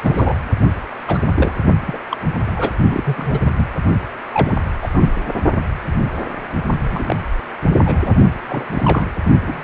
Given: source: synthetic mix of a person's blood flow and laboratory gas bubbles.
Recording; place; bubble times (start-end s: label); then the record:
Doppler ultrasound of blood flow; precordium
0.00-0.34 s: bubbles
1.07-1.21 s: bubbles
1.35-1.53 s: bubbles
1.85-1.98 s: bubbles
2.10-2.17 s: bubbles
2.46-2.52 s: bubbles
2.56-2.73 s: bubbles
2.90-3.40 s: bubbles
3.44-3.50 s: bubbles
3.56-3.67 s: bubbles
4.33-4.56 s: bubbles
4.82-4.89 s: bubbles
4.92-5.12 s: bubbles
6.92-7.19 s: bubbles
7.85-8.15 s: bubbles
8.49-8.65 s: bubbles
8.74-9.07 s: bubbles
9.47-9.64 s: bubbles
From the record:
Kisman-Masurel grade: 232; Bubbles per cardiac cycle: several, 3 to 8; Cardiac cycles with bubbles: 50 to 99%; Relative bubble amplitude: moderate (0.250 to 0.450); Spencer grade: 3 (all of the cardiac periods contain showers or single bubble signals, but not dominating or overriding the cardiac motion signals); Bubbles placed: only in the low amplitude regions of the cardiac cycle